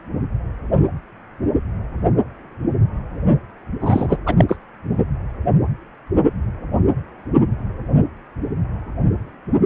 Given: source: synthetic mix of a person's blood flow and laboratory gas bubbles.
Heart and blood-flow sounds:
Doppler ultrasound of blood flow; precordium
3.81-4.17 s: bubbles
4.26-4.45 s: bubbles
4.49-4.56 s: bubbles
From the record:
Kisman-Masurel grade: 213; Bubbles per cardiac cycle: several, 3 to 8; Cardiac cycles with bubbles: 1 to 10%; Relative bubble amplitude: loud (0.450 to 0.775); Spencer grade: 1 (occasional bubble signal discernible with the cardiac motion signal, with majority of cardiac periods free of bubbles); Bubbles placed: only in the low amplitude regions of the cardiac cycle

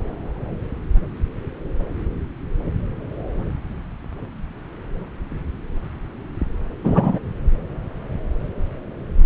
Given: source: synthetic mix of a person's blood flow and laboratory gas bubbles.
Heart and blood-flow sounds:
Doppler ultrasound of blood flow; subclavian vein
6.83-7.19 s: bubbles
From the record:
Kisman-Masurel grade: 113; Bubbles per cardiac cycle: 1 to 2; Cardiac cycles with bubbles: 1 to 10%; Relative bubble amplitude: loud (0.450 to 0.775); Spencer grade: 1 (occasional bubble signal discernible with the cardiac motion signal, with majority of cardiac periods free of bubbles); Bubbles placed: anywhere in the cardiac cycle

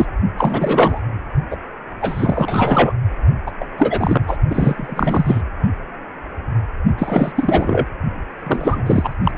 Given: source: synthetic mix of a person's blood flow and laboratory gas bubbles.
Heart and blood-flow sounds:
Doppler ultrasound of blood flow; precordium
0.00-0.06 s: bubbles
0.38-1.01 s: bubbles
1.51-1.56 s: bubbles
2.01-2.94 s: bubbles
3.46-3.52 s: bubbles
3.60-3.65 s: bubbles
3.77-4.37 s: bubbles
4.50-5.41 s: bubbles
6.98-7.32 s: bubbles
7.35-7.88 s: bubbles
8.46-8.83 s: bubbles
8.86-9.14 s: bubbles
9.23-9.31 s: bubbles
From the record:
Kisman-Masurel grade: 333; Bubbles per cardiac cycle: rolling drumbeat, 9 or more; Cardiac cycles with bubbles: 50 to 99%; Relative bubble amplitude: loud (0.450 to 0.775); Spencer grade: 3 (all of the cardiac periods contain showers or single bubble signals, but not dominating or overriding the cardiac motion signals); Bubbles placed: only in the low amplitude regions of the cardiac cycle

